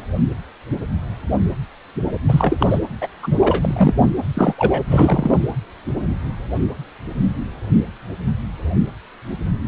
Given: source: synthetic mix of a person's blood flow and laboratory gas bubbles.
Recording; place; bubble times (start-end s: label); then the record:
Doppler ultrasound of blood flow; precordium
2.28-2.79 s: bubbles
3.01-3.07 s: bubbles
3.23-3.36 s: bubbles
3.40-3.94 s: bubbles
4.34-4.84 s: bubbles
4.88-5.40 s: bubbles
From the record:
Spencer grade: 2 (many but less than half of the cardiac periods contain bubble signals, singularly or in groups); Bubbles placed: anywhere in the cardiac cycle